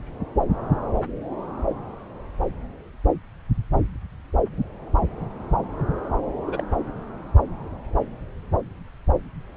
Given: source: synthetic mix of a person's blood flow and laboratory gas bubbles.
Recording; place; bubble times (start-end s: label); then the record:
Doppler ultrasound of blood flow; subclavian vein
6.44-6.63 s: bubbles
From the record:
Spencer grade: 1 (occasional bubble signal discernible with the cardiac motion signal, with majority of cardiac periods free of bubbles); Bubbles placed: anywhere in the cardiac cycle